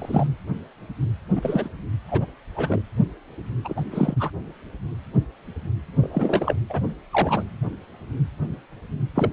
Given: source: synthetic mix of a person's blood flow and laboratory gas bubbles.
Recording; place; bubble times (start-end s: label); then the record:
Doppler ultrasound of blood flow; precordium
0.00-0.27 s: bubbles
1.35-1.69 s: bubbles
2.08-2.25 s: bubbles
2.56-2.82 s: bubbles
3.64-3.81 s: bubbles
3.92-4.30 s: bubbles
6.01-6.54 s: bubbles
6.69-6.80 s: bubbles
7.12-7.43 s: bubbles
9.15-9.31 s: bubbles
From the record:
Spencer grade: 3 (all of the cardiac periods contain showers or single bubble signals, but not dominating or overriding the cardiac motion signals); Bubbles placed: anywhere in the cardiac cycle